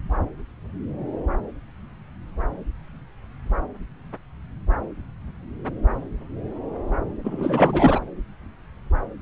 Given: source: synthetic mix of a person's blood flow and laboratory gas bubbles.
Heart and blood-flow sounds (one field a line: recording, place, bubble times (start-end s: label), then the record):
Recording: Doppler ultrasound of blood flow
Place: subclavian vein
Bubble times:
7.24-8.00 s: bubbles
From the record:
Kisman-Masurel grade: 222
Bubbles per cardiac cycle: several, 3 to 8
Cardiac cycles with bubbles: 10 to 50%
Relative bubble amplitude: moderate (0.250 to 0.450)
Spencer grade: 2 (many but less than half of the cardiac periods contain bubble signals, singularly or in groups)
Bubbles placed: anywhere in the cardiac cycle